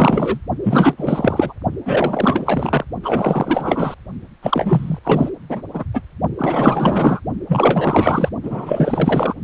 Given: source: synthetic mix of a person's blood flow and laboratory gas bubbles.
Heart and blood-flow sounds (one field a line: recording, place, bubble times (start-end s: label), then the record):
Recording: Doppler ultrasound of blood flow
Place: precordium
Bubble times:
0.00-0.39 s: bubbles
0.63-0.95 s: bubbles
0.97-1.54 s: bubbles
1.85-2.85 s: bubbles
3.02-3.94 s: bubbles
4.42-4.99 s: bubbles
5.03-5.30 s: bubbles
5.49-5.62 s: bubbles
5.73-5.84 s: bubbles
5.93-6.01 s: bubbles
6.38-7.21 s: bubbles
7.48-8.29 s: bubbles
8.43-9.34 s: bubbles
From the record:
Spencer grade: 4 (maximum detectable bubble signal sounding continuously throughout systole and diastole of every cardiac period, and overriding the amplitude of the normal cardiac signals)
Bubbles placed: only in the low amplitude regions of the cardiac cycle